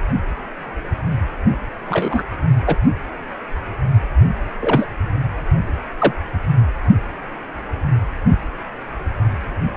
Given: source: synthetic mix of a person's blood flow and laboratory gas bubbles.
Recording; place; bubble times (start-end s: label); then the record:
Doppler ultrasound of blood flow; precordium
1.89-2.23 s: bubbles
2.67-2.76 s: bubbles
4.60-4.85 s: bubbles
5.98-6.12 s: bubbles
From the record:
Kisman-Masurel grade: 123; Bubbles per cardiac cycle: 1 to 2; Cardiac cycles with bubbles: 10 to 50%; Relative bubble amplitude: loud (0.450 to 0.775); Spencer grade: 2 (many but less than half of the cardiac periods contain bubble signals, singularly or in groups); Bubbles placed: anywhere in the cardiac cycle